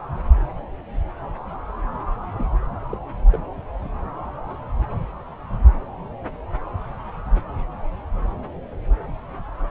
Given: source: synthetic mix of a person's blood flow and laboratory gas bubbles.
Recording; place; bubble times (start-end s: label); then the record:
Doppler ultrasound of blood flow; subclavian vein
2.33-2.48 s: bubbles
2.90-2.97 s: bubbles
3.33-3.38 s: bubbles
From the record:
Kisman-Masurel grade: 211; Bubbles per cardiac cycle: several, 3 to 8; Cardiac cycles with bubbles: 1 to 10%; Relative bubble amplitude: barely perceptible (0.100 to 0.250); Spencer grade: 1 (occasional bubble signal discernible with the cardiac motion signal, with majority of cardiac periods free of bubbles); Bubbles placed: anywhere in the cardiac cycle